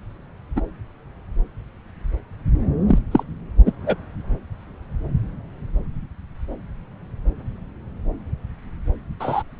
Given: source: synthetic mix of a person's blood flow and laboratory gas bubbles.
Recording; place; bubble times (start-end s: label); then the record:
Doppler ultrasound of blood flow; subclavian vein
0.56-0.60 s: bubbles
2.88-2.99 s: bubbles
3.12-3.24 s: bubbles
3.66-3.72 s: bubbles
3.86-3.96 s: bubbles
9.19-9.43 s: bubbles
From the record:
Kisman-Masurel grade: 123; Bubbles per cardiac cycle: 1 to 2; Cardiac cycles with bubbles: 10 to 50%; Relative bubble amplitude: loud (0.450 to 0.775); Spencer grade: 2 (many but less than half of the cardiac periods contain bubble signals, singularly or in groups); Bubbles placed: anywhere in the cardiac cycle